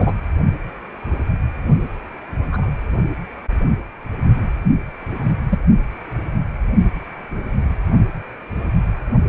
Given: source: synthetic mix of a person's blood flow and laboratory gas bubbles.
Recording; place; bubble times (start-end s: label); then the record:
Doppler ultrasound of blood flow; precordium
0.00-0.13 s: bubbles
2.52-2.69 s: bubbles
5.50-5.58 s: bubbles
From the record:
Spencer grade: 2 (many but less than half of the cardiac periods contain bubble signals, singularly or in groups); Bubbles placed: only in the low amplitude regions of the cardiac cycle